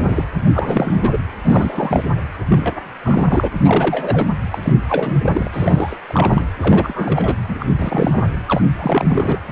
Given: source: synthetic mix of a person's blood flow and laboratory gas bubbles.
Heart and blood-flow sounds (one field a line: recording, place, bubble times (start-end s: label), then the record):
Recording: Doppler ultrasound of blood flow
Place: precordium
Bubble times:
0.00-0.24 s: bubbles
0.53-1.18 s: bubbles
1.44-2.04 s: bubbles
2.49-2.75 s: bubbles
3.02-3.48 s: bubbles
3.64-4.34 s: bubbles
4.52-4.58 s: bubbles
4.62-4.73 s: bubbles
4.88-5.49 s: bubbles
5.52-5.98 s: bubbles
6.08-6.46 s: bubbles
6.60-7.37 s: bubbles
7.48-7.55 s: bubbles
7.59-7.66 s: bubbles
7.79-8.28 s: bubbles
8.46-8.62 s: bubbles
8.79-9.39 s: bubbles
From the record:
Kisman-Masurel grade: 342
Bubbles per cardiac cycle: rolling drumbeat, 9 or more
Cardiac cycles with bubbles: 100%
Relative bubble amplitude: moderate (0.250 to 0.450)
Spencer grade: 3 (all of the cardiac periods contain showers or single bubble signals, but not dominating or overriding the cardiac motion signals)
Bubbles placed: anywhere in the cardiac cycle